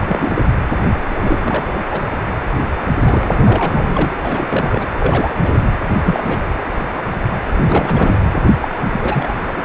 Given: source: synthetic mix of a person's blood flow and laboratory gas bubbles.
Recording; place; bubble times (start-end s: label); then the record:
Doppler ultrasound of blood flow; precordium
0.00-0.52 s: bubbles
1.08-1.39 s: bubbles
1.43-1.81 s: bubbles
1.91-2.08 s: bubbles
3.07-4.16 s: bubbles
4.25-4.87 s: bubbles
5.00-5.34 s: bubbles
5.42-5.62 s: bubbles
5.94-5.99 s: bubbles
6.04-6.48 s: bubbles
7.55-8.19 s: bubbles
8.61-8.68 s: bubbles
8.92-9.35 s: bubbles
9.48-9.52 s: bubbles
9.57-9.62 s: bubbles
From the record:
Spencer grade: 3 (all of the cardiac periods contain showers or single bubble signals, but not dominating or overriding the cardiac motion signals); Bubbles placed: anywhere in the cardiac cycle